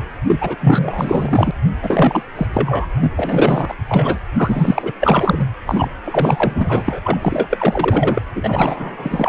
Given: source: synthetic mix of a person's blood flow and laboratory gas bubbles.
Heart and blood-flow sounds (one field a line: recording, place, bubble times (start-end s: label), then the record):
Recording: Doppler ultrasound of blood flow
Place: precordium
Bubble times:
0.27-0.55 s: bubbles
0.60-1.51 s: bubbles
1.82-2.23 s: bubbles
2.35-2.47 s: bubbles
2.53-2.88 s: bubbles
2.96-3.11 s: bubbles
3.17-3.74 s: bubbles
3.89-4.19 s: bubbles
4.37-4.93 s: bubbles
5.00-5.45 s: bubbles
5.66-5.89 s: bubbles
6.04-6.99 s: bubbles
7.04-7.18 s: bubbles
7.21-8.21 s: bubbles
8.35-9.28 s: bubbles
From the record:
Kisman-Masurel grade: 444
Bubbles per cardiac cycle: continuous sound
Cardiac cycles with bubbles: 100%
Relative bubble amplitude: maximal (0.775 to 0.999)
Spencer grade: 4 (maximum detectable bubble signal sounding continuously throughout systole and diastole of every cardiac period, and overriding the amplitude of the normal cardiac signals)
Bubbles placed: anywhere in the cardiac cycle